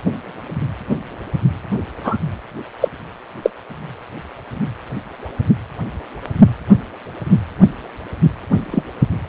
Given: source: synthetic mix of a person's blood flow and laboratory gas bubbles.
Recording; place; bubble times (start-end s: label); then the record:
Doppler ultrasound of blood flow; precordium
2.04-2.17 s: bubbles
2.81-2.89 s: bubbles
3.42-3.50 s: bubbles
8.71-8.83 s: bubbles
From the record:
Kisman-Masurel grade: 123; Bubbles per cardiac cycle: 1 to 2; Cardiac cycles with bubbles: 10 to 50%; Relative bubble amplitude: loud (0.450 to 0.775); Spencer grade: 2 (many but less than half of the cardiac periods contain bubble signals, singularly or in groups); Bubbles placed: anywhere in the cardiac cycle